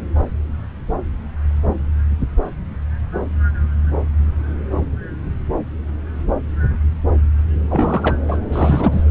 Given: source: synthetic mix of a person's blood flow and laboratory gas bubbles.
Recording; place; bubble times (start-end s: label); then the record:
Doppler ultrasound of blood flow; subclavian vein
7.68-8.16 s: bubbles
8.28-8.38 s: bubbles
8.52-9.02 s: bubbles
From the record:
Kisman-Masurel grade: 222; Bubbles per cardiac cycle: several, 3 to 8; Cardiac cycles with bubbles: 10 to 50%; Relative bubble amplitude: moderate (0.250 to 0.450); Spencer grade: 2 (many but less than half of the cardiac periods contain bubble signals, singularly or in groups); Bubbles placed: anywhere in the cardiac cycle